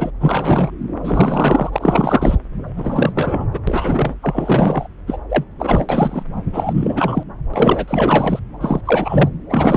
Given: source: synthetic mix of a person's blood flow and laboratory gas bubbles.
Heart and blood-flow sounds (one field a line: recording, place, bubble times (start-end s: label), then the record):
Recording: Doppler ultrasound of blood flow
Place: subclavian vein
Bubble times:
0.00-0.11 s: bubbles
0.21-0.70 s: bubbles
1.04-2.35 s: bubbles
2.76-3.12 s: bubbles
3.15-3.45 s: bubbles
3.51-3.60 s: bubbles
3.67-4.14 s: bubbles
4.22-4.88 s: bubbles
5.07-5.17 s: bubbles
5.29-5.44 s: bubbles
5.59-6.23 s: bubbles
6.52-7.24 s: bubbles
7.54-8.40 s: bubbles
8.61-8.81 s: bubbles
8.85-9.29 s: bubbles
9.49-9.77 s: bubbles
From the record:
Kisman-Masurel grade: 343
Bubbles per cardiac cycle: rolling drumbeat, 9 or more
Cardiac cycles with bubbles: 100%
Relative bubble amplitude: loud (0.450 to 0.775)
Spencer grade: 3 (all of the cardiac periods contain showers or single bubble signals, but not dominating or overriding the cardiac motion signals)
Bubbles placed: anywhere in the cardiac cycle